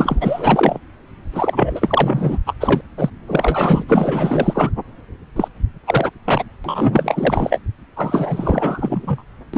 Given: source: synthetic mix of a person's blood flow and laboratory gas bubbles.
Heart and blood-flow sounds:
Doppler ultrasound of blood flow; subclavian vein
0.00-0.78 s: bubbles
1.32-2.38 s: bubbles
2.46-2.54 s: bubbles
2.60-2.81 s: bubbles
2.97-3.10 s: bubbles
3.28-3.83 s: bubbles
3.88-4.71 s: bubbles
5.36-5.48 s: bubbles
5.86-6.11 s: bubbles
6.25-6.45 s: bubbles
6.64-7.60 s: bubbles
7.96-9.22 s: bubbles
9.54-9.57 s: bubbles
From the record:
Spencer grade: 4 (maximum detectable bubble signal sounding continuously throughout systole and diastole of every cardiac period, and overriding the amplitude of the normal cardiac signals); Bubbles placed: anywhere in the cardiac cycle

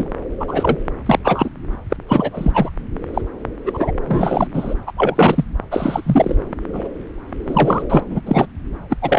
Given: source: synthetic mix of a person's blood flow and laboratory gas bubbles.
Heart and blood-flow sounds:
Doppler ultrasound of blood flow; subclavian vein
0.00-0.07 s: bubbles
0.40-0.77 s: bubbles
1.05-1.19 s: bubbles
1.24-1.50 s: bubbles
1.90-1.97 s: bubbles
2.08-2.70 s: bubbles
3.13-3.21 s: bubbles
3.65-3.92 s: bubbles
4.08-4.47 s: bubbles
4.53-4.75 s: bubbles
4.87-4.92 s: bubbles
4.96-5.44 s: bubbles
5.71-6.37 s: bubbles
6.72-6.88 s: bubbles
7.46-7.86 s: bubbles
7.88-8.04 s: bubbles
8.10-8.20 s: bubbles
8.25-8.46 s: bubbles
8.89-8.97 s: bubbles
9.02-9.19 s: bubbles
From the record:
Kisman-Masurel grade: 243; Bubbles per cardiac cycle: several, 3 to 8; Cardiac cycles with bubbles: 100%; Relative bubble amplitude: loud (0.450 to 0.775); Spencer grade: 3 (all of the cardiac periods contain showers or single bubble signals, but not dominating or overriding the cardiac motion signals); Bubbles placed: anywhere in the cardiac cycle

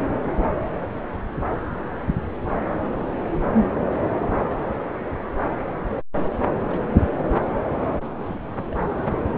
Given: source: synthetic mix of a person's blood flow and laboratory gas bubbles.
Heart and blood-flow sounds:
Doppler ultrasound of blood flow; subclavian vein
6.67-7.10 s: bubbles
8.25-8.36 s: bubbles
8.57-8.63 s: bubbles
8.70-8.78 s: bubbles
From the record:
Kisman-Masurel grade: 121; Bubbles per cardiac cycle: 1 to 2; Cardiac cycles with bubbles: 10 to 50%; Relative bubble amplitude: barely perceptible (0.100 to 0.250); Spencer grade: 2 (many but less than half of the cardiac periods contain bubble signals, singularly or in groups); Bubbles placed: anywhere in the cardiac cycle

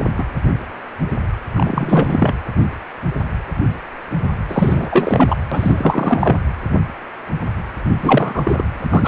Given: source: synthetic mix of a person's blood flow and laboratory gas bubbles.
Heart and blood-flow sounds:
Doppler ultrasound of blood flow; precordium
0.15-0.24 s: bubbles
1.54-2.35 s: bubbles
4.48-5.36 s: bubbles
5.51-6.37 s: bubbles
8.00-8.63 s: bubbles
8.72-9.08 s: bubbles
From the record:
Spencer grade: 3 (all of the cardiac periods contain showers or single bubble signals, but not dominating or overriding the cardiac motion signals); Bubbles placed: anywhere in the cardiac cycle

